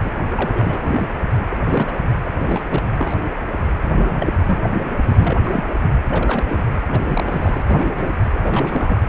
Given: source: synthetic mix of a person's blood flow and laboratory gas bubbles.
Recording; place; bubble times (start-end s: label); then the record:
Doppler ultrasound of blood flow; precordium
0.00-0.11 s: bubbles
0.31-1.08 s: bubbles
1.50-1.99 s: bubbles
2.18-2.20 s: bubbles
2.25-2.29 s: bubbles
2.39-2.64 s: bubbles
2.68-2.82 s: bubbles
2.98-3.15 s: bubbles
3.80-4.31 s: bubbles
4.37-4.69 s: bubbles
5.02-5.64 s: bubbles
6.08-6.45 s: bubbles
6.49-6.66 s: bubbles
6.90-7.00 s: bubbles
7.04-7.64 s: bubbles
7.67-8.12 s: bubbles
8.34-9.01 s: bubbles
From the record:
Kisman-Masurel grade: 242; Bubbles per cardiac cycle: several, 3 to 8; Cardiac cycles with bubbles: 100%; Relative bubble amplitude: moderate (0.250 to 0.450); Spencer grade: 3 (all of the cardiac periods contain showers or single bubble signals, but not dominating or overriding the cardiac motion signals); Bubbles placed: anywhere in the cardiac cycle